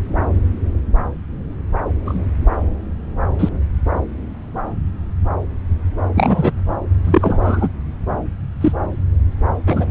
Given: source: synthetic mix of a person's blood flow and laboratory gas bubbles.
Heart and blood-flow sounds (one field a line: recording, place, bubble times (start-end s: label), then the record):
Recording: Doppler ultrasound of blood flow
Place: subclavian vein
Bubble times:
2.05-2.24 s: bubbles
3.39-3.49 s: bubbles
6.15-6.52 s: bubbles
7.04-7.69 s: bubbles
8.61-8.72 s: bubbles
9.67-9.86 s: bubbles
From the record:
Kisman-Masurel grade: 123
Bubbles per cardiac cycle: 1 to 2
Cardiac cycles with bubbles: 10 to 50%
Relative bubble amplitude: loud (0.450 to 0.775)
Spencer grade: 2 (many but less than half of the cardiac periods contain bubble signals, singularly or in groups)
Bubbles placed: anywhere in the cardiac cycle